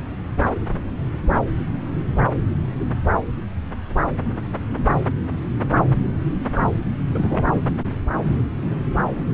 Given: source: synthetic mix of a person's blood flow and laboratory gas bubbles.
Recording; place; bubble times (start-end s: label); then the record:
Doppler ultrasound of blood flow; subclavian vein
6.54-6.65 s: bubbles
7.14-7.46 s: bubbles
7.50-7.59 s: bubbles
From the record:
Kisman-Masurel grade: 212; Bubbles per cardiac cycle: several, 3 to 8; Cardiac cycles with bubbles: 1 to 10%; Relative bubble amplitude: moderate (0.250 to 0.450); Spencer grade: 1 (occasional bubble signal discernible with the cardiac motion signal, with majority of cardiac periods free of bubbles); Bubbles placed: anywhere in the cardiac cycle